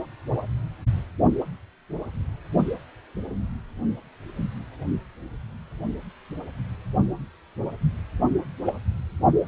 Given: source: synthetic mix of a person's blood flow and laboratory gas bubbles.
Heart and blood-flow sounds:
Doppler ultrasound of blood flow; precordium
8.65-8.73 s: bubbles
From the record:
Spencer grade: 1 (occasional bubble signal discernible with the cardiac motion signal, with majority of cardiac periods free of bubbles); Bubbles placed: only in the low amplitude regions of the cardiac cycle

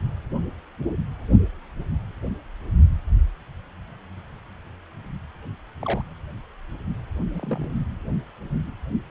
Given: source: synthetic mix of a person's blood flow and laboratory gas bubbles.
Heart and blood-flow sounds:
Doppler ultrasound of blood flow; precordium
5.83-6.02 s: bubbles
7.34-7.73 s: bubbles
From the record:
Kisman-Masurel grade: 121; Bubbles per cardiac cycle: 1 to 2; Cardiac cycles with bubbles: 10 to 50%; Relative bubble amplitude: barely perceptible (0.100 to 0.250); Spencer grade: 2 (many but less than half of the cardiac periods contain bubble signals, singularly or in groups); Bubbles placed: anywhere in the cardiac cycle

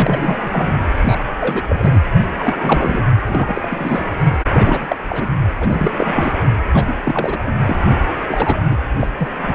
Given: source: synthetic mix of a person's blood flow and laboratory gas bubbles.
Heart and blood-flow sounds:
Doppler ultrasound of blood flow; precordium
0.00-0.74 s: bubbles
0.98-1.31 s: bubbles
1.41-1.64 s: bubbles
1.68-2.00 s: bubbles
2.39-3.03 s: bubbles
3.28-4.11 s: bubbles
4.53-4.96 s: bubbles
5.09-5.30 s: bubbles
5.60-6.34 s: bubbles
6.72-6.96 s: bubbles
7.04-7.38 s: bubbles
7.45-7.54 s: bubbles
7.65-7.76 s: bubbles
8.27-8.61 s: bubbles
8.71-8.76 s: bubbles
8.99-9.07 s: bubbles
9.18-9.30 s: bubbles
9.42-9.54 s: bubbles
From the record:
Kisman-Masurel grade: 342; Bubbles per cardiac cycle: rolling drumbeat, 9 or more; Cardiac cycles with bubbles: 100%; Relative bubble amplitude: moderate (0.250 to 0.450); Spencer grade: 3 (all of the cardiac periods contain showers or single bubble signals, but not dominating or overriding the cardiac motion signals); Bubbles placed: anywhere in the cardiac cycle

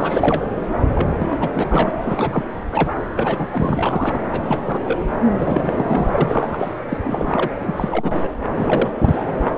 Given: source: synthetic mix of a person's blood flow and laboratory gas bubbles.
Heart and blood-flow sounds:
Doppler ultrasound of blood flow; subclavian vein
0.00-0.43 s: bubbles
0.94-1.10 s: bubbles
1.19-1.50 s: bubbles
1.54-1.91 s: bubbles
2.01-2.45 s: bubbles
2.71-2.94 s: bubbles
3.16-3.47 s: bubbles
3.52-4.19 s: bubbles
4.32-4.42 s: bubbles
4.46-4.62 s: bubbles
4.66-4.79 s: bubbles
4.85-4.99 s: bubbles
5.34-6.10 s: bubbles
6.13-6.79 s: bubbles
6.84-7.50 s: bubbles
7.63-8.17 s: bubbles
8.23-8.32 s: bubbles
8.56-8.95 s: bubbles
9.00-9.24 s: bubbles
From the record:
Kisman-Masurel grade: 342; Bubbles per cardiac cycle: rolling drumbeat, 9 or more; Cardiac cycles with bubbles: 100%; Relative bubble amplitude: moderate (0.250 to 0.450); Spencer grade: 3 (all of the cardiac periods contain showers or single bubble signals, but not dominating or overriding the cardiac motion signals); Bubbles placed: anywhere in the cardiac cycle

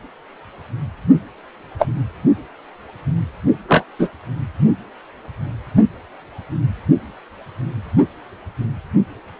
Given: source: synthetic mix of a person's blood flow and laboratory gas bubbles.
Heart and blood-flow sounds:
Doppler ultrasound of blood flow; precordium
1.79-1.87 s: bubbles
3.68-3.84 s: bubbles
3.99-4.09 s: bubbles
From the record:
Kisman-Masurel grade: 123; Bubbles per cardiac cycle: 1 to 2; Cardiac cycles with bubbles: 10 to 50%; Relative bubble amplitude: loud (0.450 to 0.775); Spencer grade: 2 (many but less than half of the cardiac periods contain bubble signals, singularly or in groups); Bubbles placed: only in the low amplitude regions of the cardiac cycle

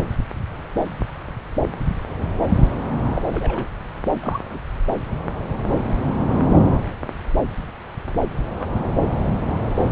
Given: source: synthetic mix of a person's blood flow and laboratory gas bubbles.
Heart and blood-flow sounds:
Doppler ultrasound of blood flow; subclavian vein
3.16-3.22 s: bubbles
3.33-3.68 s: bubbles
4.24-4.38 s: bubbles
4.50-4.58 s: bubbles
From the record:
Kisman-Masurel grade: 122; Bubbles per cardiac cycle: 1 to 2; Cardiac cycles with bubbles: 10 to 50%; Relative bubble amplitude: moderate (0.250 to 0.450); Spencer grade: 2 (many but less than half of the cardiac periods contain bubble signals, singularly or in groups); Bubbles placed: anywhere in the cardiac cycle

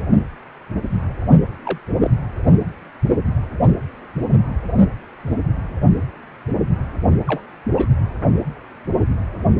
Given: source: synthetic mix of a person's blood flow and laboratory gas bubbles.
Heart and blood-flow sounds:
Doppler ultrasound of blood flow; precordium
1.64-1.78 s: bubbles
2.02-2.10 s: bubbles
7.27-7.42 s: bubbles
7.75-7.88 s: bubbles
From the record:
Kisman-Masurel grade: 122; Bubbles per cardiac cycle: 1 to 2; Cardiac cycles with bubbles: 10 to 50%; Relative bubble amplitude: moderate (0.250 to 0.450); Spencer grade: 2 (many but less than half of the cardiac periods contain bubble signals, singularly or in groups); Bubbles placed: only in the low amplitude regions of the cardiac cycle

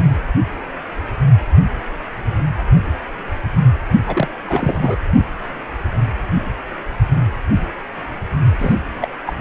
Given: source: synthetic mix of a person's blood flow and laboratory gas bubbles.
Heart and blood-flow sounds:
Doppler ultrasound of blood flow; precordium
4.07-4.28 s: bubbles
4.47-4.96 s: bubbles
8.59-8.75 s: bubbles
9.01-9.08 s: bubbles
9.26-9.33 s: bubbles
From the record:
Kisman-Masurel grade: 222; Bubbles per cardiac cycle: several, 3 to 8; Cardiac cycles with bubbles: 10 to 50%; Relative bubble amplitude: moderate (0.250 to 0.450); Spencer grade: 2 (many but less than half of the cardiac periods contain bubble signals, singularly or in groups); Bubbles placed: only in the low amplitude regions of the cardiac cycle

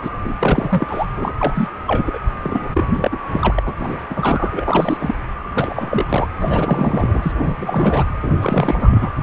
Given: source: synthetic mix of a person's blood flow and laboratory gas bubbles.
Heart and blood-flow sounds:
Doppler ultrasound of blood flow; precordium
0.02-0.10 s: bubbles
0.24-0.35 s: bubbles
0.40-1.06 s: bubbles
1.17-1.33 s: bubbles
1.39-1.70 s: bubbles
1.86-2.19 s: bubbles
2.42-2.84 s: bubbles
2.93-3.17 s: bubbles
3.31-3.62 s: bubbles
3.65-3.73 s: bubbles
3.79-4.00 s: bubbles
4.10-4.97 s: bubbles
5.00-5.15 s: bubbles
5.55-6.28 s: bubbles
6.39-7.33 s: bubbles
7.39-8.04 s: bubbles
8.21-8.33 s: bubbles
8.42-9.10 s: bubbles
9.16-9.23 s: bubbles
From the record:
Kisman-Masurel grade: 342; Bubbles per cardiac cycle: rolling drumbeat, 9 or more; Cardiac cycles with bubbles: 100%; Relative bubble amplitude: moderate (0.250 to 0.450); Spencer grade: 3 (all of the cardiac periods contain showers or single bubble signals, but not dominating or overriding the cardiac motion signals); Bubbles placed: anywhere in the cardiac cycle

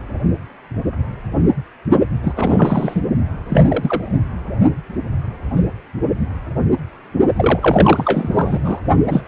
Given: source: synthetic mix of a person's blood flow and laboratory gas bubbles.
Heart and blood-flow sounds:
Doppler ultrasound of blood flow; precordium
2.23-2.32 s: bubbles
2.35-3.03 s: bubbles
3.48-4.12 s: bubbles
7.36-8.81 s: bubbles
9.06-9.21 s: bubbles
From the record:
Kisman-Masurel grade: 233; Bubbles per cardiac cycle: several, 3 to 8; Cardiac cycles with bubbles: 50 to 99%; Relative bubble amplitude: loud (0.450 to 0.775); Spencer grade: 3 (all of the cardiac periods contain showers or single bubble signals, but not dominating or overriding the cardiac motion signals); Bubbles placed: only in the low amplitude regions of the cardiac cycle

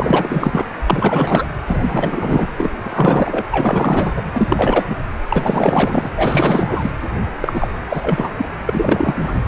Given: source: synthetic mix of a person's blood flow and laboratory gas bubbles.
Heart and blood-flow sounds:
Doppler ultrasound of blood flow; precordium
0.00-0.67 s: bubbles
0.86-1.47 s: bubbles
1.67-2.48 s: bubbles
2.57-2.72 s: bubbles
2.82-3.46 s: bubbles
3.50-4.12 s: bubbles
4.16-4.22 s: bubbles
4.33-4.85 s: bubbles
4.90-4.96 s: bubbles
5.29-6.10 s: bubbles
6.17-6.91 s: bubbles
7.41-7.68 s: bubbles
7.89-8.49 s: bubbles
8.52-8.54 s: bubbles
8.65-9.35 s: bubbles
From the record:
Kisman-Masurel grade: 444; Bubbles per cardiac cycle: continuous sound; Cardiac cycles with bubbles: 100%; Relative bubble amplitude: maximal (0.775 to 0.999); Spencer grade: 4 (maximum detectable bubble signal sounding continuously throughout systole and diastole of every cardiac period, and overriding the amplitude of the normal cardiac signals); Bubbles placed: anywhere in the cardiac cycle

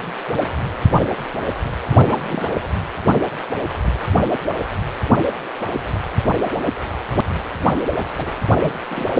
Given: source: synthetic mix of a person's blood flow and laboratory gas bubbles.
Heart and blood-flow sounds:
Doppler ultrasound of blood flow; precordium
1.89-2.55 s: bubbles
8.17-8.35 s: bubbles
8.62-8.74 s: bubbles
8.88-9.09 s: bubbles
From the record:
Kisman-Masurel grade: 221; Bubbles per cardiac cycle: several, 3 to 8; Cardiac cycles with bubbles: 10 to 50%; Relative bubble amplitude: barely perceptible (0.100 to 0.250); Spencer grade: 2 (many but less than half of the cardiac periods contain bubble signals, singularly or in groups); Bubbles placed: anywhere in the cardiac cycle

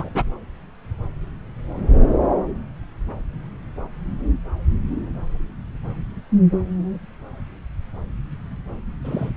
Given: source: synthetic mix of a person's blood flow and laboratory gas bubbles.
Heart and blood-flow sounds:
Doppler ultrasound of blood flow; subclavian vein
0.00-0.09 s: bubbles
0.14-0.23 s: bubbles
9.04-9.30 s: bubbles
From the record:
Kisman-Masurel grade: 222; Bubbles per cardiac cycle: several, 3 to 8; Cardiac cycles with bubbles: 10 to 50%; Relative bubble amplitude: moderate (0.250 to 0.450); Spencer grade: 2 (many but less than half of the cardiac periods contain bubble signals, singularly or in groups); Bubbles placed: anywhere in the cardiac cycle

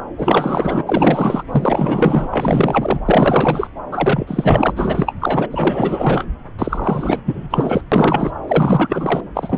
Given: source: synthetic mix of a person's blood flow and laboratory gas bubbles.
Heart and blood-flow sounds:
Doppler ultrasound of blood flow; subclavian vein
0.17-0.83 s: bubbles
0.87-1.44 s: bubbles
1.51-3.00 s: bubbles
3.06-3.69 s: bubbles
3.92-4.72 s: bubbles
4.75-5.15 s: bubbles
5.21-5.48 s: bubbles
5.50-6.25 s: bubbles
6.58-7.23 s: bubbles
7.25-7.82 s: bubbles
7.92-8.31 s: bubbles
8.47-9.21 s: bubbles
9.34-9.58 s: bubbles
From the record:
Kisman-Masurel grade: 444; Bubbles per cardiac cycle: continuous sound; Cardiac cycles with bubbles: 100%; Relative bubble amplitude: maximal (0.775 to 0.999); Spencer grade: 4 (maximum detectable bubble signal sounding continuously throughout systole and diastole of every cardiac period, and overriding the amplitude of the normal cardiac signals); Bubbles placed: anywhere in the cardiac cycle

